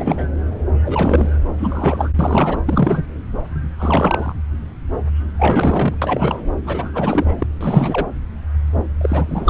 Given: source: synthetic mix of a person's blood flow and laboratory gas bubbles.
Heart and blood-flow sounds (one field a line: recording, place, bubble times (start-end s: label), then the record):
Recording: Doppler ultrasound of blood flow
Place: subclavian vein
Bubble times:
0.00-0.25 s: bubbles
0.84-1.29 s: bubbles
1.58-2.10 s: bubbles
2.19-2.59 s: bubbles
2.66-3.03 s: bubbles
3.78-4.36 s: bubbles
5.38-5.98 s: bubbles
6.01-6.42 s: bubbles
6.66-7.46 s: bubbles
7.60-8.06 s: bubbles
9.01-9.50 s: bubbles
From the record:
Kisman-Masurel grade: 333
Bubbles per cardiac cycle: rolling drumbeat, 9 or more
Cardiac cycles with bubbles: 50 to 99%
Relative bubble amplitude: loud (0.450 to 0.775)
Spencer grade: 3 (all of the cardiac periods contain showers or single bubble signals, but not dominating or overriding the cardiac motion signals)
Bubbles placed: anywhere in the cardiac cycle